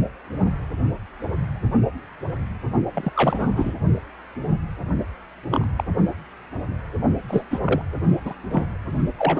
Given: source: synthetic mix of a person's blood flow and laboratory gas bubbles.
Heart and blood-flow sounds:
Doppler ultrasound of blood flow; precordium
2.94-3.11 s: bubbles
3.16-3.75 s: bubbles
5.52-5.66 s: bubbles
5.76-5.83 s: bubbles
7.29-7.43 s: bubbles
7.50-7.59 s: bubbles
7.65-7.82 s: bubbles
8.25-8.34 s: bubbles
8.51-8.66 s: bubbles
9.17-9.40 s: bubbles
From the record:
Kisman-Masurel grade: 222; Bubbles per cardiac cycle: several, 3 to 8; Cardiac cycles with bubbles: 10 to 50%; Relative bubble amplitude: moderate (0.250 to 0.450); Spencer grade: 2 (many but less than half of the cardiac periods contain bubble signals, singularly or in groups); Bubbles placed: only in the low amplitude regions of the cardiac cycle

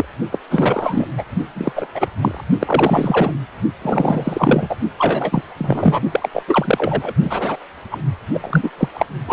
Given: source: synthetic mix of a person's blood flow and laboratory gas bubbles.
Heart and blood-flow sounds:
Doppler ultrasound of blood flow; precordium
0.00-0.05 s: bubbles
0.32-0.38 s: bubbles
0.50-1.08 s: bubbles
1.18-1.26 s: bubbles
1.55-1.72 s: bubbles
1.75-1.87 s: bubbles
1.94-2.08 s: bubbles
2.21-2.42 s: bubbles
2.59-3.32 s: bubbles
3.82-4.75 s: bubbles
4.97-5.42 s: bubbles
5.58-6.01 s: bubbles
6.12-6.29 s: bubbles
6.33-6.42 s: bubbles
6.47-7.13 s: bubbles
7.22-7.57 s: bubbles
7.92-7.98 s: bubbles
8.34-8.70 s: bubbles
8.77-8.88 s: bubbles
8.93-9.06 s: bubbles
9.26-9.33 s: bubbles
From the record:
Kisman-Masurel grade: 343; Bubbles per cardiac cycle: rolling drumbeat, 9 or more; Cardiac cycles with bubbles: 100%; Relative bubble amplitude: loud (0.450 to 0.775); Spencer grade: 3 (all of the cardiac periods contain showers or single bubble signals, but not dominating or overriding the cardiac motion signals); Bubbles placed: only in the low amplitude regions of the cardiac cycle

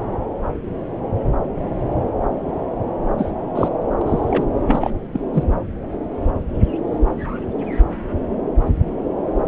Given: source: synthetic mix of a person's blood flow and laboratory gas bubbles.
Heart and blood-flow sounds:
Doppler ultrasound of blood flow; subclavian vein
3.17-3.32 s: bubbles
3.55-3.68 s: bubbles
4.01-4.54 s: bubbles
4.67-4.91 s: bubbles
5.12-5.21 s: bubbles
5.34-5.43 s: bubbles
From the record:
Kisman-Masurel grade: 223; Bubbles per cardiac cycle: several, 3 to 8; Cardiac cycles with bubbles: 10 to 50%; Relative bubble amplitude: loud (0.450 to 0.775); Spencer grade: 2 (many but less than half of the cardiac periods contain bubble signals, singularly or in groups); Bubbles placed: anywhere in the cardiac cycle

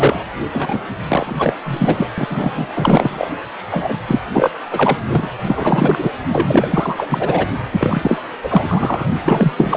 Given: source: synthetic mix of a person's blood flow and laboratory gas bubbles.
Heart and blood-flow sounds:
Doppler ultrasound of blood flow; precordium
0.00-0.21 s: bubbles
0.53-0.82 s: bubbles
1.08-1.53 s: bubbles
1.65-2.07 s: bubbles
2.17-3.29 s: bubbles
3.71-3.94 s: bubbles
4.07-4.20 s: bubbles
4.32-4.51 s: bubbles
4.71-4.97 s: bubbles
5.07-5.29 s: bubbles
5.45-6.10 s: bubbles
6.32-7.46 s: bubbles
7.71-8.19 s: bubbles
8.43-9.09 s: bubbles
9.15-9.53 s: bubbles
9.56-9.76 s: bubbles
From the record:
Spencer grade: 4 (maximum detectable bubble signal sounding continuously throughout systole and diastole of every cardiac period, and overriding the amplitude of the normal cardiac signals); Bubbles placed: anywhere in the cardiac cycle

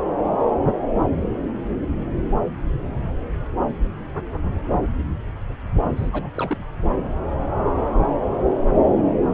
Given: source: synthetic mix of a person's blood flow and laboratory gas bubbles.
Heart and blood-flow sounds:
Doppler ultrasound of blood flow; subclavian vein
5.96-6.10 s: bubbles
6.12-6.31 s: bubbles
6.38-6.58 s: bubbles
From the record:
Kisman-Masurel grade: 211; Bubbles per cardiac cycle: several, 3 to 8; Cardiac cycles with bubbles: 1 to 10%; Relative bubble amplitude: barely perceptible (0.100 to 0.250); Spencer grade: 1 (occasional bubble signal discernible with the cardiac motion signal, with majority of cardiac periods free of bubbles); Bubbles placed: anywhere in the cardiac cycle

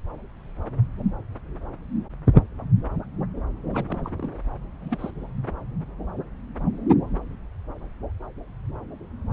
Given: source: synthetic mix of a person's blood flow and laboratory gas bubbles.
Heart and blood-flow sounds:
Doppler ultrasound of blood flow; subclavian vein
3.73-3.85 s: bubbles
3.89-4.01 s: bubbles
4.04-4.32 s: bubbles
4.82-5.11 s: bubbles
From the record:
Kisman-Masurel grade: 221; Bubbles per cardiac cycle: several, 3 to 8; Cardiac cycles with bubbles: 10 to 50%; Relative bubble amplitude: barely perceptible (0.100 to 0.250); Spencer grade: 2 (many but less than half of the cardiac periods contain bubble signals, singularly or in groups); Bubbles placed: anywhere in the cardiac cycle

